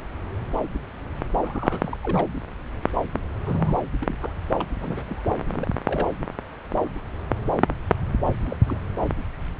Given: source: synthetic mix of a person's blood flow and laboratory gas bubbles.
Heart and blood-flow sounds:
Doppler ultrasound of blood flow; subclavian vein
1.42-1.98 s: bubbles
2.02-2.27 s: bubbles
3.40-3.77 s: bubbles
4.01-4.16 s: bubbles
4.21-4.33 s: bubbles
4.59-4.64 s: bubbles
4.80-5.21 s: bubbles
5.50-5.70 s: bubbles
5.87-6.07 s: bubbles
8.43-8.57 s: bubbles
8.66-8.80 s: bubbles
From the record:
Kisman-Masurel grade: 221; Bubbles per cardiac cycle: several, 3 to 8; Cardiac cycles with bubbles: 10 to 50%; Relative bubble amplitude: barely perceptible (0.100 to 0.250); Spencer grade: 2 (many but less than half of the cardiac periods contain bubble signals, singularly or in groups); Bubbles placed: anywhere in the cardiac cycle

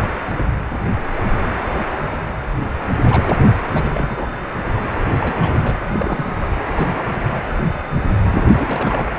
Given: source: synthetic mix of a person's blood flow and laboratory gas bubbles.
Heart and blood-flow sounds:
Doppler ultrasound of blood flow; precordium
3.04-3.38 s: bubbles
3.73-4.26 s: bubbles
5.20-5.75 s: bubbles
5.92-6.35 s: bubbles
6.40-6.52 s: bubbles
6.63-6.96 s: bubbles
7.34-7.39 s: bubbles
8.32-8.46 s: bubbles
8.51-9.10 s: bubbles
From the record:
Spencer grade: 2 (many but less than half of the cardiac periods contain bubble signals, singularly or in groups); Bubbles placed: anywhere in the cardiac cycle

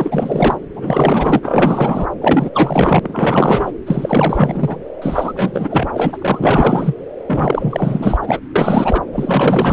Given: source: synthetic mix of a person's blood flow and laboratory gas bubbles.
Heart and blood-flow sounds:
Doppler ultrasound of blood flow; subclavian vein
0.00-0.57 s: bubbles
0.75-1.40 s: bubbles
1.42-2.07 s: bubbles
2.21-2.50 s: bubbles
2.54-3.00 s: bubbles
3.02-3.72 s: bubbles
3.86-4.78 s: bubbles
5.02-6.94 s: bubbles
7.27-8.17 s: bubbles
8.21-8.40 s: bubbles
8.55-9.01 s: bubbles
9.12-9.73 s: bubbles
From the record:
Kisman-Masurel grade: 444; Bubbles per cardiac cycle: continuous sound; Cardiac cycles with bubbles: 100%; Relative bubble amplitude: maximal (0.775 to 0.999); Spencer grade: 4 (maximum detectable bubble signal sounding continuously throughout systole and diastole of every cardiac period, and overriding the amplitude of the normal cardiac signals); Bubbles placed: anywhere in the cardiac cycle

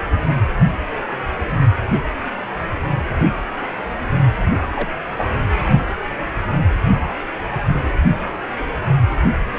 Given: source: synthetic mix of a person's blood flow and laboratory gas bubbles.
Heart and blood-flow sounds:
Doppler ultrasound of blood flow; precordium
4.72-4.99 s: bubbles
5.17-5.25 s: bubbles
From the record:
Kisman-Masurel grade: 122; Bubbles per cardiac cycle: 1 to 2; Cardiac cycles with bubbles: 10 to 50%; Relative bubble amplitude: moderate (0.250 to 0.450); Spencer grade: 2 (many but less than half of the cardiac periods contain bubble signals, singularly or in groups); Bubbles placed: only in the low amplitude regions of the cardiac cycle

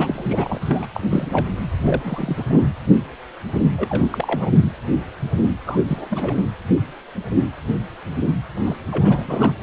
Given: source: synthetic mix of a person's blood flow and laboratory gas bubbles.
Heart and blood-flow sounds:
Doppler ultrasound of blood flow; precordium
0.00-0.85 s: bubbles
0.94-1.00 s: bubbles
1.11-1.47 s: bubbles
1.79-2.46 s: bubbles
2.48-2.69 s: bubbles
3.77-4.08 s: bubbles
4.12-4.50 s: bubbles
5.66-5.79 s: bubbles
5.88-6.37 s: bubbles
8.65-8.76 s: bubbles
8.91-9.52 s: bubbles
From the record:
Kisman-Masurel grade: 332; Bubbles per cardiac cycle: rolling drumbeat, 9 or more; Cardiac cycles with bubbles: 50 to 99%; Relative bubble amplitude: moderate (0.250 to 0.450); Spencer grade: 3 (all of the cardiac periods contain showers or single bubble signals, but not dominating or overriding the cardiac motion signals); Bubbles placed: anywhere in the cardiac cycle

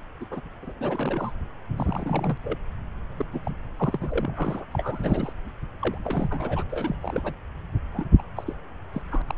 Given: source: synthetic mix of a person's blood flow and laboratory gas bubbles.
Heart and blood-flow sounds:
Doppler ultrasound of blood flow; subclavian vein
0.20-0.26 s: bubbles
0.30-0.41 s: bubbles
0.62-0.74 s: bubbles
0.78-1.32 s: bubbles
1.77-2.38 s: bubbles
2.43-2.57 s: bubbles
3.18-3.25 s: bubbles
3.31-3.40 s: bubbles
3.43-3.51 s: bubbles
3.77-4.64 s: bubbles
4.71-5.33 s: bubbles
5.81-5.97 s: bubbles
6.04-6.63 s: bubbles
6.69-6.96 s: bubbles
7.02-7.34 s: bubbles
7.93-8.05 s: bubbles
8.19-8.22 s: bubbles
8.36-8.53 s: bubbles
8.93-9.02 s: bubbles
9.11-9.22 s: bubbles
9.28-9.35 s: bubbles
From the record:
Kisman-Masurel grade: 332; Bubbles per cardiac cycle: rolling drumbeat, 9 or more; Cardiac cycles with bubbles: 50 to 99%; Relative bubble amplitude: moderate (0.250 to 0.450); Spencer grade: 3 (all of the cardiac periods contain showers or single bubble signals, but not dominating or overriding the cardiac motion signals); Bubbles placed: anywhere in the cardiac cycle

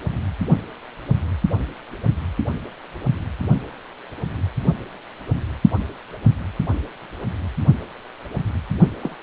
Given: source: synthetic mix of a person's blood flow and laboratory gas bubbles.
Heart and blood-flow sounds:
Doppler ultrasound of blood flow; precordium
9.01-9.15 s: bubbles
From the record:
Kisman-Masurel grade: 211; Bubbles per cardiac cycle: several, 3 to 8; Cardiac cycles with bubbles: 1 to 10%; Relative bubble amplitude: barely perceptible (0.100 to 0.250); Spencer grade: 1 (occasional bubble signal discernible with the cardiac motion signal, with majority of cardiac periods free of bubbles); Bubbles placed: only in the low amplitude regions of the cardiac cycle

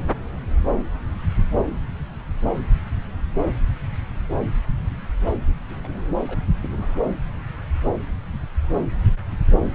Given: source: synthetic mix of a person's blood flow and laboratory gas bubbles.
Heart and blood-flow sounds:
Doppler ultrasound of blood flow; subclavian vein
5.70-5.75 s: bubbles
5.83-5.88 s: bubbles
6.27-6.39 s: bubbles
6.63-7.01 s: bubbles
From the record:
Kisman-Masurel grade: 121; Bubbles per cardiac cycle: 1 to 2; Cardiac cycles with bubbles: 10 to 50%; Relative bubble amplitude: barely perceptible (0.100 to 0.250); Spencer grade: 2 (many but less than half of the cardiac periods contain bubble signals, singularly or in groups); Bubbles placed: anywhere in the cardiac cycle

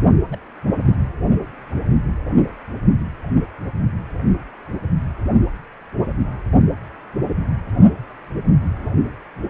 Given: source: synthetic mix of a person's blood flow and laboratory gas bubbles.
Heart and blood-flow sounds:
Doppler ultrasound of blood flow; precordium
0.31-0.37 s: bubbles
0.85-0.94 s: bubbles
From the record:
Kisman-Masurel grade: 121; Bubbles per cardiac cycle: 1 to 2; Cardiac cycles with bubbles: 10 to 50%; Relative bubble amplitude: barely perceptible (0.100 to 0.250); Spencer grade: 2 (many but less than half of the cardiac periods contain bubble signals, singularly or in groups); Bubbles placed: only in the low amplitude regions of the cardiac cycle

